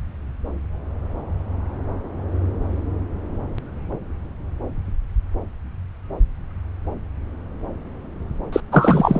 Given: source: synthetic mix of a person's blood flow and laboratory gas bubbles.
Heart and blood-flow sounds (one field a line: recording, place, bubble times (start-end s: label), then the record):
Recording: Doppler ultrasound of blood flow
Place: subclavian vein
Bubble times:
8.53-8.61 s: bubbles
8.71-9.20 s: bubbles
From the record:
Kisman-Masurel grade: 213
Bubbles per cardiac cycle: several, 3 to 8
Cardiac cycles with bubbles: 1 to 10%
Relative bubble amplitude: loud (0.450 to 0.775)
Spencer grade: 1 (occasional bubble signal discernible with the cardiac motion signal, with majority of cardiac periods free of bubbles)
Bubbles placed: anywhere in the cardiac cycle